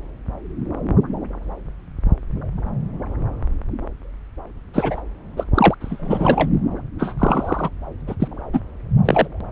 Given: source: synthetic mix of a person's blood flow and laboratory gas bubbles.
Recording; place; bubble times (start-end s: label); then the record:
Doppler ultrasound of blood flow; subclavian vein
4.74-5.01 s: bubbles
5.37-5.43 s: bubbles
5.54-5.75 s: bubbles
5.80-6.50 s: bubbles
6.99-7.14 s: bubbles
7.18-7.71 s: bubbles
8.07-8.15 s: bubbles
8.19-8.28 s: bubbles
8.53-8.60 s: bubbles
9.05-9.27 s: bubbles
From the record:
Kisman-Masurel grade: 223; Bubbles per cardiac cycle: several, 3 to 8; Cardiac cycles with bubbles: 10 to 50%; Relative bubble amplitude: loud (0.450 to 0.775); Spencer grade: 2 (many but less than half of the cardiac periods contain bubble signals, singularly or in groups); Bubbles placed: anywhere in the cardiac cycle